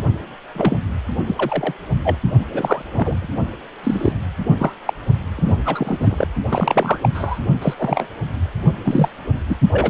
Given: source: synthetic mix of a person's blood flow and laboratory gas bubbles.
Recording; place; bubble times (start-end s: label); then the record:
Doppler ultrasound of blood flow; precordium
0.54-0.77 s: bubbles
1.27-1.34 s: bubbles
1.37-1.73 s: bubbles
2.04-2.17 s: bubbles
2.53-2.82 s: bubbles
2.96-3.29 s: bubbles
3.83-4.12 s: bubbles
4.43-4.76 s: bubbles
4.86-4.94 s: bubbles
5.37-5.55 s: bubbles
5.64-6.28 s: bubbles
6.51-6.99 s: bubbles
7.02-7.09 s: bubbles
7.14-7.39 s: bubbles
7.61-7.74 s: bubbles
7.78-8.08 s: bubbles
8.85-9.09 s: bubbles
9.49-9.56 s: bubbles
9.71-9.90 s: bubbles
From the record:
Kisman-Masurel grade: 243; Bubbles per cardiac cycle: several, 3 to 8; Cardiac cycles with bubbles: 100%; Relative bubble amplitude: loud (0.450 to 0.775); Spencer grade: 3 (all of the cardiac periods contain showers or single bubble signals, but not dominating or overriding the cardiac motion signals); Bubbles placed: only in the low amplitude regions of the cardiac cycle